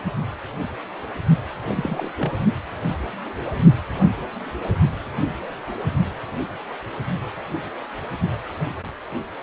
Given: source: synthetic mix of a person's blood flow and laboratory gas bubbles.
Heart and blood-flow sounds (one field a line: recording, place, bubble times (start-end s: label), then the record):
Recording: Doppler ultrasound of blood flow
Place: precordium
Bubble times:
1.66-2.09 s: bubbles
2.18-2.33 s: bubbles
From the record:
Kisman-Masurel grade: 211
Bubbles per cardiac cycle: several, 3 to 8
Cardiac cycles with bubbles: 1 to 10%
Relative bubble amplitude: barely perceptible (0.100 to 0.250)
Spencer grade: 1 (occasional bubble signal discernible with the cardiac motion signal, with majority of cardiac periods free of bubbles)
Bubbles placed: only in the low amplitude regions of the cardiac cycle